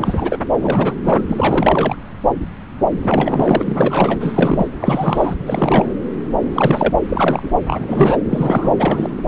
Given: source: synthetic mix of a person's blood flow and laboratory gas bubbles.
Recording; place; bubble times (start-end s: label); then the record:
Doppler ultrasound of blood flow; subclavian vein
0.00-0.38 s: bubbles
0.60-0.95 s: bubbles
1.03-1.21 s: bubbles
1.28-1.96 s: bubbles
3.02-4.67 s: bubbles
4.80-5.35 s: bubbles
5.46-5.88 s: bubbles
6.52-6.93 s: bubbles
7.08-7.51 s: bubbles
7.67-8.17 s: bubbles
8.29-8.72 s: bubbles
8.78-9.22 s: bubbles
From the record:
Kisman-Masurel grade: 333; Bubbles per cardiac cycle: rolling drumbeat, 9 or more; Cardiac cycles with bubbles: 50 to 99%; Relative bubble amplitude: loud (0.450 to 0.775); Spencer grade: 3 (all of the cardiac periods contain showers or single bubble signals, but not dominating or overriding the cardiac motion signals); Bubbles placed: anywhere in the cardiac cycle